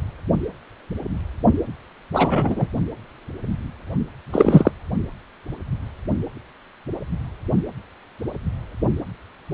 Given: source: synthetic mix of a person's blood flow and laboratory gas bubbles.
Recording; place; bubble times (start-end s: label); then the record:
Doppler ultrasound of blood flow; precordium
2.13-2.67 s: bubbles
4.32-4.72 s: bubbles
From the record:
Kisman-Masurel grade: 223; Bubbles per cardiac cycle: several, 3 to 8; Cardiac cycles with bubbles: 10 to 50%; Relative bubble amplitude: loud (0.450 to 0.775); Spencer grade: 2 (many but less than half of the cardiac periods contain bubble signals, singularly or in groups); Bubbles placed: only in the low amplitude regions of the cardiac cycle